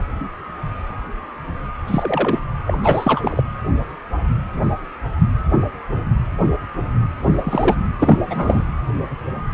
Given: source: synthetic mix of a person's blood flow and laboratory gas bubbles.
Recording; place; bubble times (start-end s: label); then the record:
Doppler ultrasound of blood flow; precordium
1.87-2.39 s: bubbles
2.67-3.43 s: bubbles
7.19-7.75 s: bubbles
8.00-8.18 s: bubbles
8.24-8.63 s: bubbles
From the record:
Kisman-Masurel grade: 223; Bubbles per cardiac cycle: several, 3 to 8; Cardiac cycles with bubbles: 10 to 50%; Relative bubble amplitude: loud (0.450 to 0.775); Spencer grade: 2 (many but less than half of the cardiac periods contain bubble signals, singularly or in groups); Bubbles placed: anywhere in the cardiac cycle